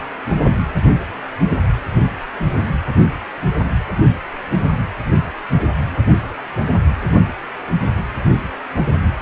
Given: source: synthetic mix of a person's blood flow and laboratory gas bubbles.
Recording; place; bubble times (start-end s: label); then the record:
Doppler ultrasound of blood flow; precordium
no bubbles
From the record:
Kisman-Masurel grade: 000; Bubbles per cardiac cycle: 0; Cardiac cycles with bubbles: 0%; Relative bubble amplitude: no bubbles discernible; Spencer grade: 0 (complete lack of bubble signals)